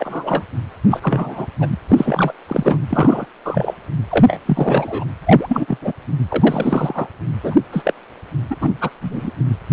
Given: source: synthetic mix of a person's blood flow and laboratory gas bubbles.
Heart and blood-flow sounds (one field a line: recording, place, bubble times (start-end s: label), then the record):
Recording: Doppler ultrasound of blood flow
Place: precordium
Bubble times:
0.00-0.45 s: bubbles
0.90-1.47 s: bubbles
1.60-1.76 s: bubbles
1.88-2.33 s: bubbles
2.49-2.79 s: bubbles
2.89-3.26 s: bubbles
3.44-3.74 s: bubbles
4.09-4.40 s: bubbles
4.46-5.05 s: bubbles
5.26-5.78 s: bubbles
5.81-5.92 s: bubbles
6.28-7.08 s: bubbles
7.43-7.54 s: bubbles
7.72-7.93 s: bubbles
8.50-8.56 s: bubbles
8.61-8.77 s: bubbles
8.80-8.90 s: bubbles
9.01-9.31 s: bubbles
From the record:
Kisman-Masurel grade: 243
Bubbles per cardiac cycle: several, 3 to 8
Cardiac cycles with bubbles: 100%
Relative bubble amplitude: loud (0.450 to 0.775)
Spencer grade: 3 (all of the cardiac periods contain showers or single bubble signals, but not dominating or overriding the cardiac motion signals)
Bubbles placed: anywhere in the cardiac cycle